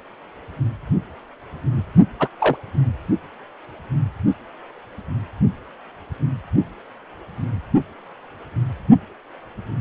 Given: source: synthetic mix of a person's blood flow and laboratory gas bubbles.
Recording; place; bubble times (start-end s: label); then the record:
Doppler ultrasound of blood flow; precordium
2.20-2.28 s: bubbles
2.39-2.56 s: bubbles
From the record:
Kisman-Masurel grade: 113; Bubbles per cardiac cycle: 1 to 2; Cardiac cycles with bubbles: 1 to 10%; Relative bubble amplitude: loud (0.450 to 0.775); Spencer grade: 1 (occasional bubble signal discernible with the cardiac motion signal, with majority of cardiac periods free of bubbles); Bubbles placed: only in the low amplitude regions of the cardiac cycle